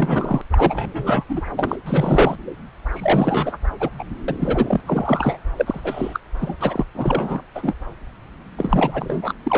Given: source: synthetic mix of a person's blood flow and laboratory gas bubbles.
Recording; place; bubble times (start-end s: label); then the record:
Doppler ultrasound of blood flow; subclavian vein
0.00-0.41 s: bubbles
0.50-1.24 s: bubbles
1.28-1.41 s: bubbles
1.56-1.78 s: bubbles
1.86-2.35 s: bubbles
2.92-3.57 s: bubbles
3.80-3.90 s: bubbles
3.98-4.04 s: bubbles
4.28-4.36 s: bubbles
4.39-4.81 s: bubbles
4.86-5.38 s: bubbles
5.56-5.80 s: bubbles
5.84-6.20 s: bubbles
6.42-6.56 s: bubbles
6.61-6.86 s: bubbles
6.95-7.42 s: bubbles
7.55-7.75 s: bubbles
8.57-9.33 s: bubbles
9.43-9.58 s: bubbles
From the record:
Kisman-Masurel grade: 342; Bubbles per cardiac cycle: rolling drumbeat, 9 or more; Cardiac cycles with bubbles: 100%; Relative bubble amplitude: moderate (0.250 to 0.450); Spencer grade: 3 (all of the cardiac periods contain showers or single bubble signals, but not dominating or overriding the cardiac motion signals); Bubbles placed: anywhere in the cardiac cycle